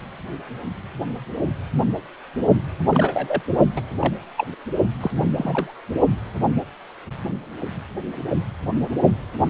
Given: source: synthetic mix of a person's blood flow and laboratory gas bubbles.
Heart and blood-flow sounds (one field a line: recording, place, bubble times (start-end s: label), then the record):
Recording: Doppler ultrasound of blood flow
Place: precordium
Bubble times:
2.89-3.42 s: bubbles
3.76-3.81 s: bubbles
3.99-4.14 s: bubbles
4.38-4.46 s: bubbles
5.00-5.11 s: bubbles
5.16-5.25 s: bubbles
5.36-5.72 s: bubbles
From the record:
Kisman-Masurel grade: 222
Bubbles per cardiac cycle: several, 3 to 8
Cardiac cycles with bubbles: 10 to 50%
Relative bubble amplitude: moderate (0.250 to 0.450)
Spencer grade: 2 (many but less than half of the cardiac periods contain bubble signals, singularly or in groups)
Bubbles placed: only in the low amplitude regions of the cardiac cycle